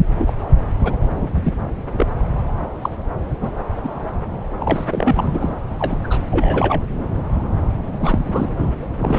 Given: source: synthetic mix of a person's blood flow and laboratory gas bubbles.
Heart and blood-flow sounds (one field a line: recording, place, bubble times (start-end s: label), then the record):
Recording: Doppler ultrasound of blood flow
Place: subclavian vein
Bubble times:
0.18-0.33 s: bubbles
0.83-0.96 s: bubbles
1.16-1.30 s: bubbles
1.44-1.55 s: bubbles
1.98-2.06 s: bubbles
2.81-2.90 s: bubbles
3.40-3.51 s: bubbles
3.83-4.06 s: bubbles
4.59-4.85 s: bubbles
4.91-5.50 s: bubbles
5.79-5.97 s: bubbles
6.04-6.25 s: bubbles
6.30-6.83 s: bubbles
7.99-8.47 s: bubbles
8.57-8.71 s: bubbles
8.98-9.18 s: bubbles
From the record:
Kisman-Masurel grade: 232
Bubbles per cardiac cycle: several, 3 to 8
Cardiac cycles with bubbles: 50 to 99%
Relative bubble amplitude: moderate (0.250 to 0.450)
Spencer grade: 3 (all of the cardiac periods contain showers or single bubble signals, but not dominating or overriding the cardiac motion signals)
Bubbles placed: anywhere in the cardiac cycle